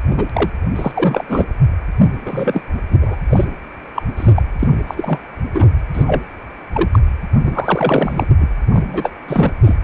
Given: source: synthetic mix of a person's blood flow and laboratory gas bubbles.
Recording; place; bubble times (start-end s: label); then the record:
Doppler ultrasound of blood flow; precordium
0.10-0.30 s: bubbles
0.33-0.50 s: bubbles
0.76-1.24 s: bubbles
1.28-1.45 s: bubbles
2.04-2.09 s: bubbles
2.25-2.63 s: bubbles
2.90-2.98 s: bubbles
3.01-3.16 s: bubbles
3.29-3.45 s: bubbles
3.95-4.03 s: bubbles
4.17-4.33 s: bubbles
4.36-4.43 s: bubbles
4.59-4.68 s: bubbles
4.87-5.19 s: bubbles
5.54-5.69 s: bubbles
5.94-6.22 s: bubbles
6.73-6.89 s: bubbles
6.92-7.00 s: bubbles
7.45-8.26 s: bubbles
8.40-8.47 s: bubbles
8.73-9.10 s: bubbles
9.28-9.52 s: bubbles
9.66-9.77 s: bubbles
From the record:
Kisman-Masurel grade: 243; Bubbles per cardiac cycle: several, 3 to 8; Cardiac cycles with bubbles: 100%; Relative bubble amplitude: loud (0.450 to 0.775); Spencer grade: 3 (all of the cardiac periods contain showers or single bubble signals, but not dominating or overriding the cardiac motion signals); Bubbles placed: anywhere in the cardiac cycle